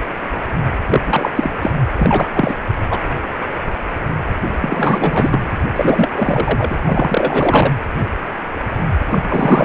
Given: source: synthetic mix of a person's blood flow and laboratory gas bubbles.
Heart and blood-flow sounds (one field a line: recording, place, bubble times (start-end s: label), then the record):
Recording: Doppler ultrasound of blood flow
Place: precordium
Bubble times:
0.86-1.32 s: bubbles
1.35-1.50 s: bubbles
1.61-1.71 s: bubbles
1.96-2.54 s: bubbles
2.90-3.00 s: bubbles
4.60-5.46 s: bubbles
5.75-6.09 s: bubbles
6.14-6.75 s: bubbles
6.85-7.70 s: bubbles
9.07-9.23 s: bubbles
9.28-9.65 s: bubbles
From the record:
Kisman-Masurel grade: 333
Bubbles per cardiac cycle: rolling drumbeat, 9 or more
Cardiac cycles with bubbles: 50 to 99%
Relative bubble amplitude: loud (0.450 to 0.775)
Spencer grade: 3 (all of the cardiac periods contain showers or single bubble signals, but not dominating or overriding the cardiac motion signals)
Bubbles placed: anywhere in the cardiac cycle